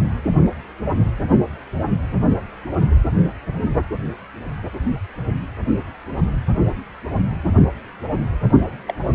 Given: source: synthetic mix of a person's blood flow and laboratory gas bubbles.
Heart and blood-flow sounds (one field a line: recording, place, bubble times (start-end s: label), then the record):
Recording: Doppler ultrasound of blood flow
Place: precordium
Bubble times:
8.88-8.94 s: bubbles
9.13-9.15 s: bubbles
From the record:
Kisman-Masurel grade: 212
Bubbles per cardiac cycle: several, 3 to 8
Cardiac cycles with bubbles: 1 to 10%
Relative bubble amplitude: moderate (0.250 to 0.450)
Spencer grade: 1 (occasional bubble signal discernible with the cardiac motion signal, with majority of cardiac periods free of bubbles)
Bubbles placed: only in the low amplitude regions of the cardiac cycle